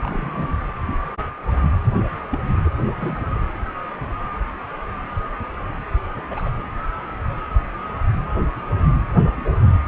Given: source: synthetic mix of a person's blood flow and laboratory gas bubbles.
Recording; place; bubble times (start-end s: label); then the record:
Doppler ultrasound of blood flow; precordium
0.00-0.48 s: bubbles
2.31-2.40 s: bubbles
2.64-2.70 s: bubbles
2.85-3.26 s: bubbles
6.30-6.49 s: bubbles
From the record:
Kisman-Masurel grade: 121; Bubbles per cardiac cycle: 1 to 2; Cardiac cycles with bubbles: 10 to 50%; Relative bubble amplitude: barely perceptible (0.100 to 0.250); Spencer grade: 2 (many but less than half of the cardiac periods contain bubble signals, singularly or in groups); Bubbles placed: anywhere in the cardiac cycle